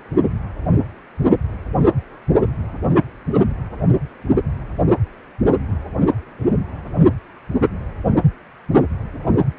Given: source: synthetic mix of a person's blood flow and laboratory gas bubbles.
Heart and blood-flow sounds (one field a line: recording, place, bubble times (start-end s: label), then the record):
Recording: Doppler ultrasound of blood flow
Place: precordium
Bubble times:
no bubbles
From the record:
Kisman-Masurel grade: 000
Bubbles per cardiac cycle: 0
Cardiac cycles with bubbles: 0%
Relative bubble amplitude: no bubbles discernible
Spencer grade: 0 (complete lack of bubble signals)